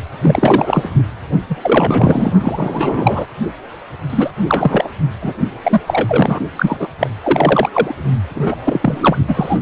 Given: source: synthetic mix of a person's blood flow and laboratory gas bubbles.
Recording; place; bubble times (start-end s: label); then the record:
Doppler ultrasound of blood flow; precordium
0.21-0.89 s: bubbles
1.50-1.56 s: bubbles
1.62-2.33 s: bubbles
2.42-3.26 s: bubbles
4.10-4.31 s: bubbles
4.47-4.89 s: bubbles
5.22-5.33 s: bubbles
5.40-5.50 s: bubbles
5.63-5.81 s: bubbles
5.87-6.39 s: bubbles
6.57-6.77 s: bubbles
6.79-6.88 s: bubbles
7.00-7.10 s: bubbles
7.23-7.69 s: bubbles
7.71-7.95 s: bubbles
8.36-8.56 s: bubbles
8.64-9.17 s: bubbles
9.28-9.58 s: bubbles
From the record:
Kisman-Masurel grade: 343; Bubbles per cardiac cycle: rolling drumbeat, 9 or more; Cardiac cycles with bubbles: 100%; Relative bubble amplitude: loud (0.450 to 0.775); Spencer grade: 3 (all of the cardiac periods contain showers or single bubble signals, but not dominating or overriding the cardiac motion signals); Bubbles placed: only in the low amplitude regions of the cardiac cycle